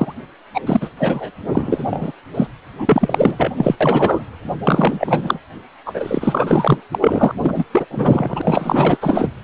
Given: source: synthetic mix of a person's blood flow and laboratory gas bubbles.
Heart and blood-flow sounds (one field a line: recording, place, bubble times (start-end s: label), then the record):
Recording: Doppler ultrasound of blood flow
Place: precordium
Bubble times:
0.00-0.13 s: bubbles
0.54-0.61 s: bubbles
0.66-0.89 s: bubbles
0.97-1.31 s: bubbles
1.46-2.12 s: bubbles
2.34-2.47 s: bubbles
2.77-3.51 s: bubbles
3.57-3.75 s: bubbles
3.81-4.25 s: bubbles
4.64-5.38 s: bubbles
5.86-6.81 s: bubbles
6.92-7.32 s: bubbles
7.39-7.64 s: bubbles
7.72-7.87 s: bubbles
7.90-8.42 s: bubbles
8.44-8.98 s: bubbles
9.01-9.29 s: bubbles
From the record:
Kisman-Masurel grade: 444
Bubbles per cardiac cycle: continuous sound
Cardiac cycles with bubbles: 100%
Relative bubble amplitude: maximal (0.775 to 0.999)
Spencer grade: 4 (maximum detectable bubble signal sounding continuously throughout systole and diastole of every cardiac period, and overriding the amplitude of the normal cardiac signals)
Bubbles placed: anywhere in the cardiac cycle